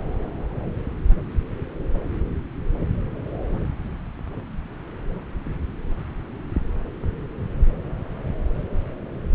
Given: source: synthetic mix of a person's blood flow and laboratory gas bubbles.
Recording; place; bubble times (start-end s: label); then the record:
Doppler ultrasound of blood flow; subclavian vein
no bubbles
From the record:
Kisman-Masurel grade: 000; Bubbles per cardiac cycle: 0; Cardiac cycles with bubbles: 0%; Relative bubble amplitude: no bubbles discernible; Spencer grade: 0 (complete lack of bubble signals)